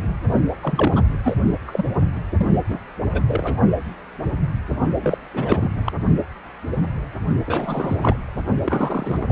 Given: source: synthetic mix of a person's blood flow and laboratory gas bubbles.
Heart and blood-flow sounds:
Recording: Doppler ultrasound of blood flow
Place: precordium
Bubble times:
0.61-1.02 s: bubbles
1.24-1.35 s: bubbles
1.67-1.84 s: bubbles
2.15-2.20 s: bubbles
2.38-2.46 s: bubbles
2.68-2.79 s: bubbles
3.13-3.21 s: bubbles
3.27-3.54 s: bubbles
5.01-5.18 s: bubbles
5.33-5.71 s: bubbles
5.86-5.93 s: bubbles
7.46-8.17 s: bubbles
8.64-9.32 s: bubbles
From the record:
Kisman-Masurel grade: 332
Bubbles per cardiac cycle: rolling drumbeat, 9 or more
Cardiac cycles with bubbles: 50 to 99%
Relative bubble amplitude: moderate (0.250 to 0.450)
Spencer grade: 3 (all of the cardiac periods contain showers or single bubble signals, but not dominating or overriding the cardiac motion signals)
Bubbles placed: only in the low amplitude regions of the cardiac cycle

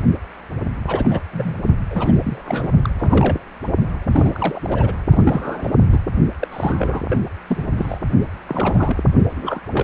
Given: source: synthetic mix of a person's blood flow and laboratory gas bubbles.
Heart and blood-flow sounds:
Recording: Doppler ultrasound of blood flow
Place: precordium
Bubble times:
0.86-1.22 s: bubbles
1.33-1.55 s: bubbles
1.90-2.70 s: bubbles
2.83-2.90 s: bubbles
2.95-3.41 s: bubbles
4.11-4.95 s: bubbles
5.10-5.71 s: bubbles
5.92-6.01 s: bubbles
6.39-6.47 s: bubbles
6.51-7.02 s: bubbles
7.09-7.25 s: bubbles
7.47-7.99 s: bubbles
8.46-9.03 s: bubbles
9.36-9.61 s: bubbles
9.72-9.84 s: bubbles
From the record:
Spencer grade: 3 (all of the cardiac periods contain showers or single bubble signals, but not dominating or overriding the cardiac motion signals)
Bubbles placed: only in the low amplitude regions of the cardiac cycle

